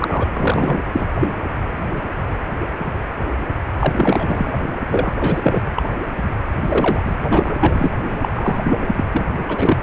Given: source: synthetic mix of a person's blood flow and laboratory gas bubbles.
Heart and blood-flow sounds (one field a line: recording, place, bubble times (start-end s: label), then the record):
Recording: Doppler ultrasound of blood flow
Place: precordium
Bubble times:
0.00-0.80 s: bubbles
0.93-1.06 s: bubbles
1.20-1.27 s: bubbles
3.79-4.52 s: bubbles
4.88-5.13 s: bubbles
5.20-5.62 s: bubbles
5.75-5.94 s: bubbles
6.61-7.19 s: bubbles
7.29-7.55 s: bubbles
7.60-7.91 s: bubbles
8.09-8.17 s: bubbles
8.22-8.58 s: bubbles
8.63-8.95 s: bubbles
8.99-9.04 s: bubbles
9.12-9.26 s: bubbles
9.48-9.78 s: bubbles
From the record:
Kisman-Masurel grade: 333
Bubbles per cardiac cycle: rolling drumbeat, 9 or more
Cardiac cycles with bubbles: 50 to 99%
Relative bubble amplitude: loud (0.450 to 0.775)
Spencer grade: 3 (all of the cardiac periods contain showers or single bubble signals, but not dominating or overriding the cardiac motion signals)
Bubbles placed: anywhere in the cardiac cycle